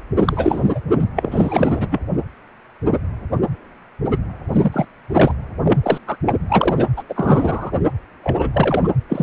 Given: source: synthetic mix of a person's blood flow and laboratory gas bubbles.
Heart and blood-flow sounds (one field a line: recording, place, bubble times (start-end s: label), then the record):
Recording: Doppler ultrasound of blood flow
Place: precordium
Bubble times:
0.16-0.81 s: bubbles
0.91-1.04 s: bubbles
1.16-2.02 s: bubbles
4.52-4.86 s: bubbles
5.08-5.33 s: bubbles
5.63-5.79 s: bubbles
5.83-5.98 s: bubbles
6.07-6.17 s: bubbles
6.27-6.33 s: bubbles
6.48-6.85 s: bubbles
6.96-7.03 s: bubbles
7.08-7.71 s: bubbles
8.23-8.88 s: bubbles
9.09-9.23 s: bubbles
From the record:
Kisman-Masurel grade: 333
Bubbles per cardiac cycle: rolling drumbeat, 9 or more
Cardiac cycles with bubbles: 50 to 99%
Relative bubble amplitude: loud (0.450 to 0.775)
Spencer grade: 3 (all of the cardiac periods contain showers or single bubble signals, but not dominating or overriding the cardiac motion signals)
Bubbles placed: anywhere in the cardiac cycle